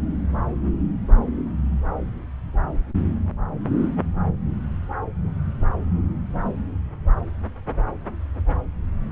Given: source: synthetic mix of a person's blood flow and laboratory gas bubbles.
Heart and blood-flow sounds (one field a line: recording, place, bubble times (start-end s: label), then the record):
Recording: Doppler ultrasound of blood flow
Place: subclavian vein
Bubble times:
no bubbles
From the record:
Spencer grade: 0 (complete lack of bubble signals)